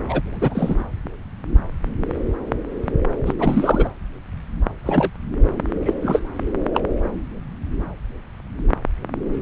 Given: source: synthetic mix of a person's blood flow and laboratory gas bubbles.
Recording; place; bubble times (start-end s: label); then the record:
Doppler ultrasound of blood flow; subclavian vein
0.08-0.21 s: bubbles
0.33-0.76 s: bubbles
3.25-3.33 s: bubbles
3.38-3.89 s: bubbles
4.83-5.12 s: bubbles
5.86-5.94 s: bubbles
6.03-6.20 s: bubbles
6.74-6.80 s: bubbles
From the record:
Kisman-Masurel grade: 232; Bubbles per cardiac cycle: several, 3 to 8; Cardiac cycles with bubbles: 50 to 99%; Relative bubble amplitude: moderate (0.250 to 0.450); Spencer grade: 3 (all of the cardiac periods contain showers or single bubble signals, but not dominating or overriding the cardiac motion signals); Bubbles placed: anywhere in the cardiac cycle